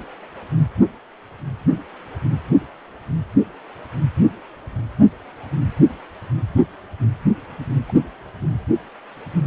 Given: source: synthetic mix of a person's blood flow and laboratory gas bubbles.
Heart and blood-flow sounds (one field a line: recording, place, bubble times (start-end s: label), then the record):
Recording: Doppler ultrasound of blood flow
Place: precordium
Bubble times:
7.88-7.92 s: bubbles
From the record:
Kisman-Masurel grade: 111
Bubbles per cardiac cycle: 1 to 2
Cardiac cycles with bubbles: 1 to 10%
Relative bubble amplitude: barely perceptible (0.100 to 0.250)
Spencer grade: 1 (occasional bubble signal discernible with the cardiac motion signal, with majority of cardiac periods free of bubbles)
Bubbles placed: anywhere in the cardiac cycle